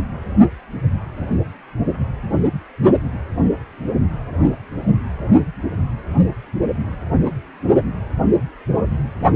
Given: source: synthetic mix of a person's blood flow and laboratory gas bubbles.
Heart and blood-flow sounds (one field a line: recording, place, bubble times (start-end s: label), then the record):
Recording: Doppler ultrasound of blood flow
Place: precordium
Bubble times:
no bubbles
From the record:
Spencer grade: 0 (complete lack of bubble signals)